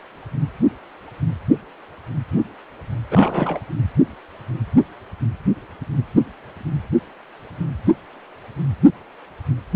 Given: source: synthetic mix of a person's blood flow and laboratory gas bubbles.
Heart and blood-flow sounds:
Doppler ultrasound of blood flow; precordium
3.11-3.60 s: bubbles
From the record:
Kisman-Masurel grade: 212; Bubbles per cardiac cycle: several, 3 to 8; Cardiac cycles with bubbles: 1 to 10%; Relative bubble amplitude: moderate (0.250 to 0.450); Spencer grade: 1 (occasional bubble signal discernible with the cardiac motion signal, with majority of cardiac periods free of bubbles); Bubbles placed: anywhere in the cardiac cycle

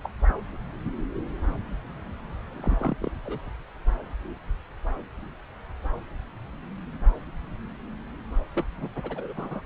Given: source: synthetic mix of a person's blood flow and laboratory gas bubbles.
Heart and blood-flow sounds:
Doppler ultrasound of blood flow; subclavian vein
0.04-0.09 s: bubbles
0.29-0.33 s: bubbles
2.53-3.10 s: bubbles
3.26-3.38 s: bubbles
8.54-8.65 s: bubbles
8.78-8.88 s: bubbles
8.96-9.34 s: bubbles
9.37-9.61 s: bubbles
From the record:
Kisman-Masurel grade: 221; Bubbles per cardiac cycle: several, 3 to 8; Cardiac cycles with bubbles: 10 to 50%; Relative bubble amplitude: barely perceptible (0.100 to 0.250); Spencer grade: 2 (many but less than half of the cardiac periods contain bubble signals, singularly or in groups); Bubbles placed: anywhere in the cardiac cycle

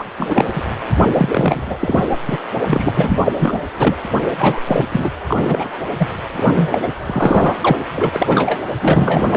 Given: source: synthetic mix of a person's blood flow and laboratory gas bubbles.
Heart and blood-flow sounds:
Doppler ultrasound of blood flow; precordium
0.00-0.04 s: bubbles
0.17-0.63 s: bubbles
1.03-2.17 s: bubbles
2.29-2.38 s: bubbles
2.67-3.19 s: bubbles
3.24-3.33 s: bubbles
3.38-3.60 s: bubbles
3.78-3.97 s: bubbles
4.38-4.61 s: bubbles
4.67-4.86 s: bubbles
4.91-5.10 s: bubbles
5.28-5.79 s: bubbles
5.98-6.08 s: bubbles
6.37-6.88 s: bubbles
7.06-7.54 s: bubbles
7.61-7.84 s: bubbles
7.95-8.61 s: bubbles
8.81-9.37 s: bubbles
From the record:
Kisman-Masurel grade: 343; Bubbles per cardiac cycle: rolling drumbeat, 9 or more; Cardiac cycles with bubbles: 100%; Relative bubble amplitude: loud (0.450 to 0.775); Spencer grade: 3 (all of the cardiac periods contain showers or single bubble signals, but not dominating or overriding the cardiac motion signals); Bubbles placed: anywhere in the cardiac cycle

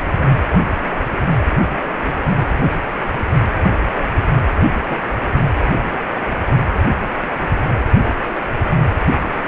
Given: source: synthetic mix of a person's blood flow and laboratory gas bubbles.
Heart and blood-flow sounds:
Doppler ultrasound of blood flow; precordium
2.88-2.92 s: bubbles
3.18-3.25 s: bubbles
4.84-4.99 s: bubbles
6.30-6.36 s: bubbles
From the record:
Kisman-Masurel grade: 121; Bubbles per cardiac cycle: 1 to 2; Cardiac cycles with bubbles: 10 to 50%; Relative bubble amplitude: barely perceptible (0.100 to 0.250); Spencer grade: 2 (many but less than half of the cardiac periods contain bubble signals, singularly or in groups); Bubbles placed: anywhere in the cardiac cycle

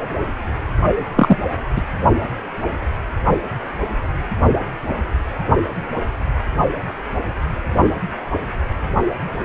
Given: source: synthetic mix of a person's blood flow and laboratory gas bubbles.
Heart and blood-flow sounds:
Doppler ultrasound of blood flow; precordium
1.16-1.36 s: bubbles
1.76-1.81 s: bubbles
From the record:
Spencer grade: 1 (occasional bubble signal discernible with the cardiac motion signal, with majority of cardiac periods free of bubbles); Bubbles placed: anywhere in the cardiac cycle

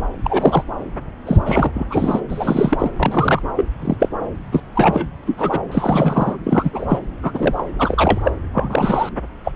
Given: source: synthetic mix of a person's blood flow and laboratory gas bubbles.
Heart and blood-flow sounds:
Doppler ultrasound of blood flow; subclavian vein
0.24-0.63 s: bubbles
1.25-1.38 s: bubbles
1.46-1.71 s: bubbles
1.74-1.86 s: bubbles
1.90-2.21 s: bubbles
2.29-2.90 s: bubbles
2.96-3.43 s: bubbles
3.56-3.65 s: bubbles
3.82-3.97 s: bubbles
4.00-4.09 s: bubbles
4.51-4.61 s: bubbles
4.75-5.08 s: bubbles
5.26-5.60 s: bubbles
5.71-6.36 s: bubbles
6.43-6.71 s: bubbles
6.73-6.85 s: bubbles
6.88-7.00 s: bubbles
7.23-7.65 s: bubbles
7.79-8.32 s: bubbles
8.54-9.09 s: bubbles
9.44-9.52 s: bubbles
From the record:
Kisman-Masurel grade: 243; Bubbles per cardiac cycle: several, 3 to 8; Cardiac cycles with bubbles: 100%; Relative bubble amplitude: loud (0.450 to 0.775); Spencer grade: 3 (all of the cardiac periods contain showers or single bubble signals, but not dominating or overriding the cardiac motion signals); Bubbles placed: anywhere in the cardiac cycle

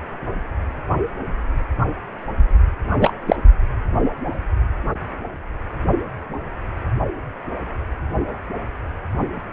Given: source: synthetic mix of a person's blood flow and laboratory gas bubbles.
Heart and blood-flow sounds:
Doppler ultrasound of blood flow; precordium
3.00-3.13 s: bubbles
3.27-3.36 s: bubbles
From the record:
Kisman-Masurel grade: 213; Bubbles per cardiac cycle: several, 3 to 8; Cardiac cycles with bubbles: 1 to 10%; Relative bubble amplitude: loud (0.450 to 0.775); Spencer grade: 1 (occasional bubble signal discernible with the cardiac motion signal, with majority of cardiac periods free of bubbles); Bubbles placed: only in the low amplitude regions of the cardiac cycle

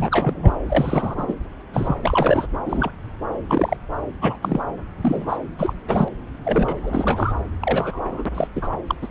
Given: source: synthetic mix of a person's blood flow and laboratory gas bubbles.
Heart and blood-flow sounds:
Doppler ultrasound of blood flow; subclavian vein
0.00-0.52 s: bubbles
0.69-1.35 s: bubbles
1.72-1.96 s: bubbles
2.01-2.46 s: bubbles
2.65-2.91 s: bubbles
3.48-3.77 s: bubbles
4.21-4.36 s: bubbles
4.42-4.60 s: bubbles
5.01-5.37 s: bubbles
5.58-5.73 s: bubbles
5.88-6.08 s: bubbles
6.44-6.77 s: bubbles
6.83-7.33 s: bubbles
7.61-8.29 s: bubbles
8.35-8.48 s: bubbles
8.55-8.70 s: bubbles
8.87-8.95 s: bubbles
9.02-9.09 s: bubbles
From the record:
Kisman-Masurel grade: 243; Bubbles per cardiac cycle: several, 3 to 8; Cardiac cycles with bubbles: 100%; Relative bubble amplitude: loud (0.450 to 0.775); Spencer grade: 3 (all of the cardiac periods contain showers or single bubble signals, but not dominating or overriding the cardiac motion signals); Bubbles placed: anywhere in the cardiac cycle

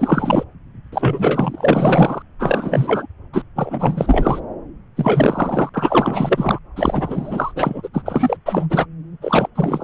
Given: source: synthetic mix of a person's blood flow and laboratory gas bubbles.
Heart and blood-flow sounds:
Doppler ultrasound of blood flow; subclavian vein
0.00-0.44 s: bubbles
0.92-2.22 s: bubbles
2.39-3.07 s: bubbles
3.33-3.43 s: bubbles
3.56-4.40 s: bubbles
4.96-5.69 s: bubbles
5.73-6.58 s: bubbles
6.76-7.88 s: bubbles
7.93-8.02 s: bubbles
8.05-8.37 s: bubbles
8.45-8.67 s: bubbles
8.70-8.86 s: bubbles
9.21-9.48 s: bubbles
9.55-9.84 s: bubbles
From the record:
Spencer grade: 4 (maximum detectable bubble signal sounding continuously throughout systole and diastole of every cardiac period, and overriding the amplitude of the normal cardiac signals); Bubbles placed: anywhere in the cardiac cycle

